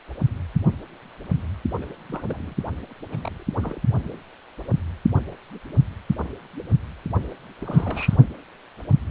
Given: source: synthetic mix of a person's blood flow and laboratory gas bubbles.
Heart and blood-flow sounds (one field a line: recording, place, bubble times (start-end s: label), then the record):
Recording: Doppler ultrasound of blood flow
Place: precordium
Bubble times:
1.81-1.85 s: bubbles
2.06-2.23 s: bubbles
2.26-2.54 s: bubbles
3.11-3.33 s: bubbles
3.35-3.43 s: bubbles
3.62-3.81 s: bubbles
7.61-8.17 s: bubbles
From the record:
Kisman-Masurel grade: 221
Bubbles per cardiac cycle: several, 3 to 8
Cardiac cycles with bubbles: 10 to 50%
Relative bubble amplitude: barely perceptible (0.100 to 0.250)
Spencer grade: 2 (many but less than half of the cardiac periods contain bubble signals, singularly or in groups)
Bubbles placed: only in the low amplitude regions of the cardiac cycle